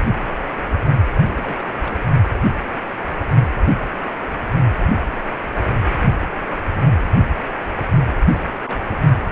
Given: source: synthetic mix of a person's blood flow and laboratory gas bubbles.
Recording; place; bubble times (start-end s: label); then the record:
Doppler ultrasound of blood flow; precordium
1.27-1.68 s: bubbles
1.75-2.08 s: bubbles
8.25-8.36 s: bubbles
8.65-9.16 s: bubbles
From the record:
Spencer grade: 2 (many but less than half of the cardiac periods contain bubble signals, singularly or in groups); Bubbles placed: anywhere in the cardiac cycle